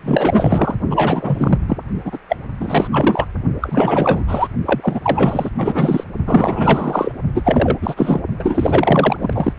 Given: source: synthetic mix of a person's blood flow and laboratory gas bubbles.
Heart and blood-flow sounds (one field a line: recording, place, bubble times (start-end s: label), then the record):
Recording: Doppler ultrasound of blood flow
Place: precordium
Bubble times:
0.03-0.75 s: bubbles
0.89-1.59 s: bubbles
1.68-1.79 s: bubbles
2.04-2.18 s: bubbles
2.28-2.36 s: bubbles
2.60-2.88 s: bubbles
2.91-3.27 s: bubbles
3.61-4.23 s: bubbles
4.27-4.47 s: bubbles
4.65-5.50 s: bubbles
5.56-6.04 s: bubbles
6.25-7.12 s: bubbles
7.34-7.77 s: bubbles
7.81-8.20 s: bubbles
8.39-9.53 s: bubbles
From the record:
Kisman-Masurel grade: 444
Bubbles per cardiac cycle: continuous sound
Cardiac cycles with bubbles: 100%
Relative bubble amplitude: maximal (0.775 to 0.999)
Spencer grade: 4 (maximum detectable bubble signal sounding continuously throughout systole and diastole of every cardiac period, and overriding the amplitude of the normal cardiac signals)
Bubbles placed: only in the low amplitude regions of the cardiac cycle